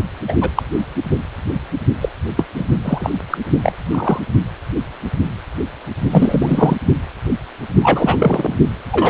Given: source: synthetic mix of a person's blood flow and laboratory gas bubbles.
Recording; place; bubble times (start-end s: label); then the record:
Doppler ultrasound of blood flow; precordium
0.28-0.36 s: bubbles
0.41-0.51 s: bubbles
0.55-0.62 s: bubbles
2.01-2.09 s: bubbles
2.37-2.45 s: bubbles
2.55-2.65 s: bubbles
2.81-3.10 s: bubbles
3.30-3.38 s: bubbles
3.63-3.74 s: bubbles
3.91-4.20 s: bubbles
6.11-6.77 s: bubbles
7.82-8.54 s: bubbles
8.91-9.10 s: bubbles
From the record:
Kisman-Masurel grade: 233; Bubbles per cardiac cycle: several, 3 to 8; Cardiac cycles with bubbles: 50 to 99%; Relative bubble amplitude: loud (0.450 to 0.775); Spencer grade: 3 (all of the cardiac periods contain showers or single bubble signals, but not dominating or overriding the cardiac motion signals); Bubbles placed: only in the low amplitude regions of the cardiac cycle